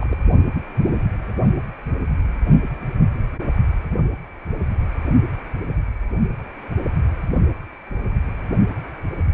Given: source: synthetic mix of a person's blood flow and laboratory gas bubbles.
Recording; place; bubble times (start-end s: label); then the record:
Doppler ultrasound of blood flow; precordium
0.00-0.17 s: bubbles
From the record:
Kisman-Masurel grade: 211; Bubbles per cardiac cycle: several, 3 to 8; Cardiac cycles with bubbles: 1 to 10%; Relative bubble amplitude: barely perceptible (0.100 to 0.250); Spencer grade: 1 (occasional bubble signal discernible with the cardiac motion signal, with majority of cardiac periods free of bubbles); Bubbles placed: only in the low amplitude regions of the cardiac cycle